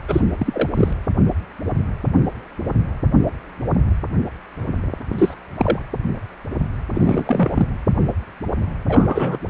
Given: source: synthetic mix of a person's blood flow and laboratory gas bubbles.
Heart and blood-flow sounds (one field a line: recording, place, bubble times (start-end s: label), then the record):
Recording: Doppler ultrasound of blood flow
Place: precordium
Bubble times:
0.08-0.21 s: bubbles
0.38-0.69 s: bubbles
0.74-0.93 s: bubbles
5.12-5.34 s: bubbles
5.55-5.80 s: bubbles
6.95-7.65 s: bubbles
8.89-9.38 s: bubbles
From the record:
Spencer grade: 2 (many but less than half of the cardiac periods contain bubble signals, singularly or in groups)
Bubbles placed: anywhere in the cardiac cycle